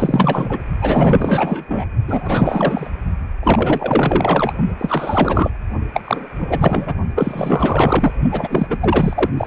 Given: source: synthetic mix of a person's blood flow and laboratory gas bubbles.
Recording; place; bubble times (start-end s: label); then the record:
Doppler ultrasound of blood flow; precordium
0.00-0.60 s: bubbles
0.81-1.64 s: bubbles
1.68-1.86 s: bubbles
2.08-2.89 s: bubbles
3.43-4.53 s: bubbles
4.79-5.51 s: bubbles
5.94-6.01 s: bubbles
6.04-6.28 s: bubbles
6.40-6.95 s: bubbles
7.15-8.12 s: bubbles
8.30-8.67 s: bubbles
8.70-8.78 s: bubbles
8.80-9.29 s: bubbles
9.37-9.47 s: bubbles
From the record:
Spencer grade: 4 (maximum detectable bubble signal sounding continuously throughout systole and diastole of every cardiac period, and overriding the amplitude of the normal cardiac signals); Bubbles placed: only in the low amplitude regions of the cardiac cycle